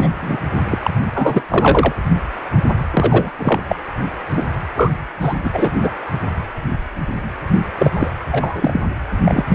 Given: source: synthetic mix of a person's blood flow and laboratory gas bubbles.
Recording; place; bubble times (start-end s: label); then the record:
Doppler ultrasound of blood flow; precordium
0.00-0.09 s: bubbles
0.21-0.37 s: bubbles
0.70-0.78 s: bubbles
0.83-0.91 s: bubbles
1.14-1.43 s: bubbles
1.49-1.93 s: bubbles
2.90-3.31 s: bubbles
3.38-3.60 s: bubbles
3.67-3.75 s: bubbles
4.30-4.47 s: bubbles
4.74-4.92 s: bubbles
5.21-5.34 s: bubbles
5.44-5.50 s: bubbles
5.53-5.71 s: bubbles
5.83-5.91 s: bubbles
7.78-7.91 s: bubbles
7.93-8.11 s: bubbles
8.32-8.81 s: bubbles
9.25-9.55 s: bubbles
From the record:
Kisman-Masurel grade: 333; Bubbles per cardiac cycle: rolling drumbeat, 9 or more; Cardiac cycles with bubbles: 50 to 99%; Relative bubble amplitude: loud (0.450 to 0.775); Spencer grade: 3 (all of the cardiac periods contain showers or single bubble signals, but not dominating or overriding the cardiac motion signals); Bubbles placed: anywhere in the cardiac cycle